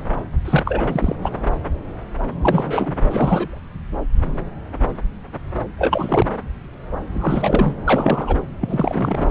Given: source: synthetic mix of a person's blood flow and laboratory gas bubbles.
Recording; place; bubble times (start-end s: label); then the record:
Doppler ultrasound of blood flow; subclavian vein
0.45-1.16 s: bubbles
1.21-1.30 s: bubbles
2.42-2.93 s: bubbles
3.09-3.59 s: bubbles
5.78-6.27 s: bubbles
7.12-7.75 s: bubbles
7.85-8.35 s: bubbles
8.61-9.31 s: bubbles
From the record:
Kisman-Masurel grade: 333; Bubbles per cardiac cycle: rolling drumbeat, 9 or more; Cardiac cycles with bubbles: 50 to 99%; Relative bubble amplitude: loud (0.450 to 0.775); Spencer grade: 3 (all of the cardiac periods contain showers or single bubble signals, but not dominating or overriding the cardiac motion signals); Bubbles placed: anywhere in the cardiac cycle